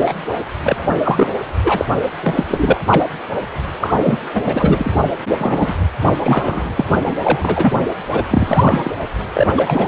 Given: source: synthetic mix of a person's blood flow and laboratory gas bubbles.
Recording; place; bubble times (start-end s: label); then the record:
Doppler ultrasound of blood flow; precordium
0.00-0.13 s: bubbles
0.63-0.95 s: bubbles
1.02-1.30 s: bubbles
1.64-1.86 s: bubbles
2.23-2.44 s: bubbles
2.48-2.81 s: bubbles
2.88-3.02 s: bubbles
3.81-3.95 s: bubbles
4.03-4.18 s: bubbles
4.34-4.41 s: bubbles
4.45-5.00 s: bubbles
5.29-5.74 s: bubbles
6.22-6.72 s: bubbles
6.75-6.84 s: bubbles
6.95-7.14 s: bubbles
7.18-7.74 s: bubbles
8.11-8.25 s: bubbles
8.30-8.91 s: bubbles
9.34-9.47 s: bubbles
9.57-9.88 s: bubbles
From the record:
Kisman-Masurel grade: 243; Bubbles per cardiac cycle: several, 3 to 8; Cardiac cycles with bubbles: 100%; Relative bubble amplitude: loud (0.450 to 0.775); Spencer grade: 3 (all of the cardiac periods contain showers or single bubble signals, but not dominating or overriding the cardiac motion signals); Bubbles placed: anywhere in the cardiac cycle